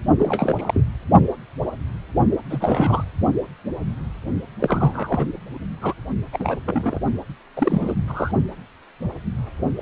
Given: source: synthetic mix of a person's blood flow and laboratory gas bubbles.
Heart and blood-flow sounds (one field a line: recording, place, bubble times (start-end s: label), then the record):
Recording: Doppler ultrasound of blood flow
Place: precordium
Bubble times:
0.18-0.84 s: bubbles
2.50-3.04 s: bubbles
4.60-5.26 s: bubbles
5.82-5.93 s: bubbles
6.33-6.59 s: bubbles
6.66-6.99 s: bubbles
7.55-7.95 s: bubbles
8.08-8.32 s: bubbles
9.77-9.82 s: bubbles
From the record:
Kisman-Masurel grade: 232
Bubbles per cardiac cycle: several, 3 to 8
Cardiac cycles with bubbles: 50 to 99%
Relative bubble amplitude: moderate (0.250 to 0.450)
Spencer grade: 3 (all of the cardiac periods contain showers or single bubble signals, but not dominating or overriding the cardiac motion signals)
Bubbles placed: only in the low amplitude regions of the cardiac cycle